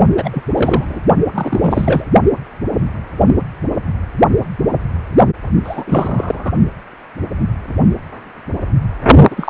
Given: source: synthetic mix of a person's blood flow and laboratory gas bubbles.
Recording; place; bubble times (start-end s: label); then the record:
Doppler ultrasound of blood flow; precordium
0.17-0.43 s: bubbles
0.54-1.02 s: bubbles
1.33-2.04 s: bubbles
5.64-6.52 s: bubbles
9.30-9.50 s: bubbles
From the record:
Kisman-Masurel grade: 333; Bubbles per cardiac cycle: rolling drumbeat, 9 or more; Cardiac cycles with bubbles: 50 to 99%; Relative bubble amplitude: loud (0.450 to 0.775); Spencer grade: 3 (all of the cardiac periods contain showers or single bubble signals, but not dominating or overriding the cardiac motion signals); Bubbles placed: only in the low amplitude regions of the cardiac cycle